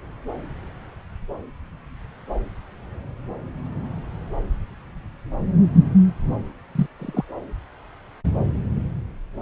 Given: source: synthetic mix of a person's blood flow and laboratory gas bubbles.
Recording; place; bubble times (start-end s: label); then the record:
Doppler ultrasound of blood flow; subclavian vein
6.75-6.87 s: bubbles
6.99-7.25 s: bubbles
From the record:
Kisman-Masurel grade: 122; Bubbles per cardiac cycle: 1 to 2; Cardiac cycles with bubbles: 10 to 50%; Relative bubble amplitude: moderate (0.250 to 0.450); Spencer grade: 2 (many but less than half of the cardiac periods contain bubble signals, singularly or in groups); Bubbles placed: anywhere in the cardiac cycle